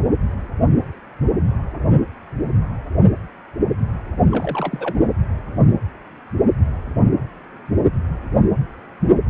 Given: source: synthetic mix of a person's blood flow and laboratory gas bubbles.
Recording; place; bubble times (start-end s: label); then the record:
Doppler ultrasound of blood flow; precordium
4.31-5.09 s: bubbles
From the record:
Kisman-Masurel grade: 211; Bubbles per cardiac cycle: several, 3 to 8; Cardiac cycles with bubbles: 1 to 10%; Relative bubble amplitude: barely perceptible (0.100 to 0.250); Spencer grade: 1 (occasional bubble signal discernible with the cardiac motion signal, with majority of cardiac periods free of bubbles); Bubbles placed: anywhere in the cardiac cycle